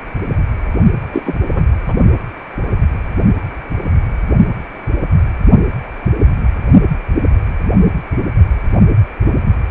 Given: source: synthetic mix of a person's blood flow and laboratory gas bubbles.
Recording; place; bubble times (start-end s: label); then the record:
Doppler ultrasound of blood flow; precordium
1.12-1.35 s: bubbles
1.48-1.67 s: bubbles
1.88-1.94 s: bubbles
From the record:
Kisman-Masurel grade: 213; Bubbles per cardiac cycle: several, 3 to 8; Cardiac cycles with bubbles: 1 to 10%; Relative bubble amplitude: loud (0.450 to 0.775); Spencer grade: 1 (occasional bubble signal discernible with the cardiac motion signal, with majority of cardiac periods free of bubbles); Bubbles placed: only in the low amplitude regions of the cardiac cycle